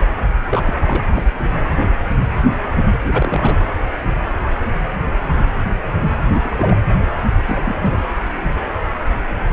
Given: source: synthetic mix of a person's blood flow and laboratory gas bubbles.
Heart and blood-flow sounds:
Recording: Doppler ultrasound of blood flow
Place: precordium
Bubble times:
0.51-0.74 s: bubbles
0.86-1.03 s: bubbles
1.13-1.23 s: bubbles
1.37-1.52 s: bubbles
3.02-3.58 s: bubbles
6.33-6.76 s: bubbles
7.46-7.62 s: bubbles
7.64-8.04 s: bubbles
From the record:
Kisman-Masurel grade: 222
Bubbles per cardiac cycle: several, 3 to 8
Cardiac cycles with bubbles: 10 to 50%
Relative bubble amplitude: moderate (0.250 to 0.450)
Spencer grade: 2 (many but less than half of the cardiac periods contain bubble signals, singularly or in groups)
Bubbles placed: anywhere in the cardiac cycle

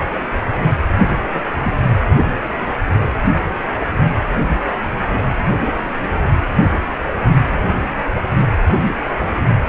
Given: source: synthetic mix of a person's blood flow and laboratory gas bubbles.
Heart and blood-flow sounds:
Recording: Doppler ultrasound of blood flow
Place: precordium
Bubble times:
1.04-1.41 s: bubbles
1.62-1.72 s: bubbles
From the record:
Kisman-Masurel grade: 121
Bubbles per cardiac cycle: 1 to 2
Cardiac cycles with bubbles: 10 to 50%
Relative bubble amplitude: barely perceptible (0.100 to 0.250)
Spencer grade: 2 (many but less than half of the cardiac periods contain bubble signals, singularly or in groups)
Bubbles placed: anywhere in the cardiac cycle

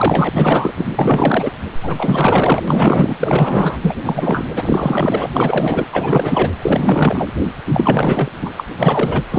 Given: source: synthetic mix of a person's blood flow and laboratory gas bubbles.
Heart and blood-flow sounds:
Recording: Doppler ultrasound of blood flow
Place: precordium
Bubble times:
0.00-0.29 s: bubbles
0.34-0.72 s: bubbles
0.76-0.90 s: bubbles
0.96-1.50 s: bubbles
1.83-2.62 s: bubbles
2.67-3.15 s: bubbles
3.19-3.77 s: bubbles
3.81-3.95 s: bubbles
4.03-4.47 s: bubbles
4.55-5.27 s: bubbles
5.33-5.87 s: bubbles
5.92-6.50 s: bubbles
6.62-7.28 s: bubbles
7.66-8.31 s: bubbles
8.41-8.50 s: bubbles
8.57-8.65 s: bubbles
8.79-9.22 s: bubbles
9.29-9.39 s: bubbles
From the record:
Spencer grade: 4 (maximum detectable bubble signal sounding continuously throughout systole and diastole of every cardiac period, and overriding the amplitude of the normal cardiac signals)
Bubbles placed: anywhere in the cardiac cycle

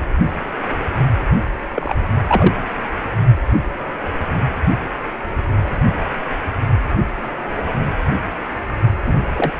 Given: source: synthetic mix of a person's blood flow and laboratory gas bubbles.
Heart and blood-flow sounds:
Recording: Doppler ultrasound of blood flow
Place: precordium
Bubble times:
1.75-1.94 s: bubbles
2.28-2.54 s: bubbles
9.04-9.13 s: bubbles
9.36-9.53 s: bubbles
From the record:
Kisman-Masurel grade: 122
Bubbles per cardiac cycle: 1 to 2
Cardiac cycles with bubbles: 10 to 50%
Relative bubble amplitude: moderate (0.250 to 0.450)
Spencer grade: 2 (many but less than half of the cardiac periods contain bubble signals, singularly or in groups)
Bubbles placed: only in the low amplitude regions of the cardiac cycle

